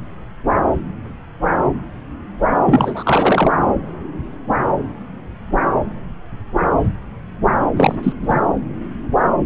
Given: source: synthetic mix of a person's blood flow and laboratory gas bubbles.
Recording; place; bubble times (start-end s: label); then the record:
Doppler ultrasound of blood flow; subclavian vein
2.63-3.52 s: bubbles
7.76-7.96 s: bubbles
8.03-8.13 s: bubbles
8.22-8.38 s: bubbles
From the record:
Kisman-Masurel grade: 223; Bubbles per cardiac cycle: several, 3 to 8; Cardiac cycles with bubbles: 10 to 50%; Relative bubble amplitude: loud (0.450 to 0.775); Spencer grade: 2 (many but less than half of the cardiac periods contain bubble signals, singularly or in groups); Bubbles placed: anywhere in the cardiac cycle